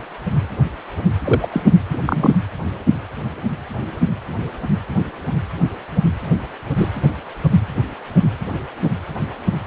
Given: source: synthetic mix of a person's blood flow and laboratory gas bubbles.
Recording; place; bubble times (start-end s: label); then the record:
Doppler ultrasound of blood flow; precordium
1.24-1.49 s: bubbles
1.51-1.62 s: bubbles
1.90-1.98 s: bubbles
2.05-2.41 s: bubbles
6.78-6.88 s: bubbles
From the record:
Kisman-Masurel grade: 122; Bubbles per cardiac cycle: 1 to 2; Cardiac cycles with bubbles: 10 to 50%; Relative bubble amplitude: moderate (0.250 to 0.450); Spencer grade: 2 (many but less than half of the cardiac periods contain bubble signals, singularly or in groups); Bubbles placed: anywhere in the cardiac cycle